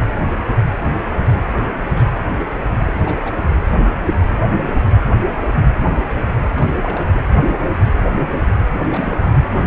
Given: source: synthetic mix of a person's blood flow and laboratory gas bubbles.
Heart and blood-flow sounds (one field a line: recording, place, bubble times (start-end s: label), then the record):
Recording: Doppler ultrasound of blood flow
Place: precordium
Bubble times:
1.27-1.36 s: bubbles
1.44-1.64 s: bubbles
1.95-2.21 s: bubbles
2.86-3.33 s: bubbles
6.54-7.08 s: bubbles
7.14-7.25 s: bubbles
8.81-9.38 s: bubbles
9.53-9.66 s: bubbles
From the record:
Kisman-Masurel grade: 221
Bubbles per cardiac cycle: several, 3 to 8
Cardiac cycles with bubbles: 10 to 50%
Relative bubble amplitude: barely perceptible (0.100 to 0.250)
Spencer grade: 2 (many but less than half of the cardiac periods contain bubble signals, singularly or in groups)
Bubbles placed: anywhere in the cardiac cycle